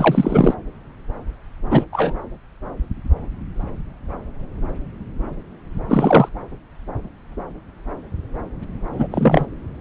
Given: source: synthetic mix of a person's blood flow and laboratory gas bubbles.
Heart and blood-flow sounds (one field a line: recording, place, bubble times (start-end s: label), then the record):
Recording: Doppler ultrasound of blood flow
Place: subclavian vein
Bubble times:
0.00-0.55 s: bubbles
1.70-1.84 s: bubbles
1.92-2.14 s: bubbles
5.88-6.29 s: bubbles
8.93-9.07 s: bubbles
9.12-9.46 s: bubbles
From the record:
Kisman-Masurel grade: 223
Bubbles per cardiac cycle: several, 3 to 8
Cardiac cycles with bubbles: 10 to 50%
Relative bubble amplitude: loud (0.450 to 0.775)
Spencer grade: 2 (many but less than half of the cardiac periods contain bubble signals, singularly or in groups)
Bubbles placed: anywhere in the cardiac cycle